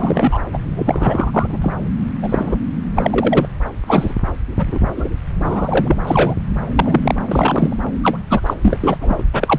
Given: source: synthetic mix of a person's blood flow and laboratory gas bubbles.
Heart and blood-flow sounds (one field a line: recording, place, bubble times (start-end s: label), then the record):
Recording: Doppler ultrasound of blood flow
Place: subclavian vein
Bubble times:
0.00-0.38 s: bubbles
0.53-0.57 s: bubbles
0.76-1.57 s: bubbles
1.61-1.77 s: bubbles
2.22-2.57 s: bubbles
2.94-3.49 s: bubbles
3.87-4.14 s: bubbles
4.58-4.79 s: bubbles
4.95-5.09 s: bubbles
5.40-5.97 s: bubbles
6.05-6.35 s: bubbles
6.76-7.15 s: bubbles
7.28-7.76 s: bubbles
8.03-8.18 s: bubbles
8.29-8.41 s: bubbles
8.46-8.54 s: bubbles
8.62-8.98 s: bubbles
9.00-9.23 s: bubbles
9.33-9.59 s: bubbles
From the record:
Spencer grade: 3 (all of the cardiac periods contain showers or single bubble signals, but not dominating or overriding the cardiac motion signals)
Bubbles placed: anywhere in the cardiac cycle